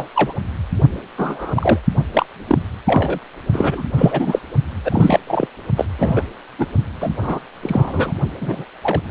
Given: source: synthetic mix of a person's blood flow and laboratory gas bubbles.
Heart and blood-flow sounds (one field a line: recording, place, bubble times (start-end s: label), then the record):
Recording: Doppler ultrasound of blood flow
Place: precordium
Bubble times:
0.00-0.08 s: bubbles
0.15-0.33 s: bubbles
1.18-1.79 s: bubbles
2.13-2.25 s: bubbles
2.47-2.58 s: bubbles
2.86-3.19 s: bubbles
3.52-3.85 s: bubbles
3.97-4.39 s: bubbles
4.84-5.20 s: bubbles
5.27-5.46 s: bubbles
5.76-5.85 s: bubbles
5.98-6.25 s: bubbles
6.58-6.67 s: bubbles
7.00-7.11 s: bubbles
7.21-7.39 s: bubbles
7.62-8.13 s: bubbles
8.41-8.65 s: bubbles
8.83-9.01 s: bubbles
From the record:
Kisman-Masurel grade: 243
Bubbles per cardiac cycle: several, 3 to 8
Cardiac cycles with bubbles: 100%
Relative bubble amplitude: loud (0.450 to 0.775)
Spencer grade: 3 (all of the cardiac periods contain showers or single bubble signals, but not dominating or overriding the cardiac motion signals)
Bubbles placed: only in the low amplitude regions of the cardiac cycle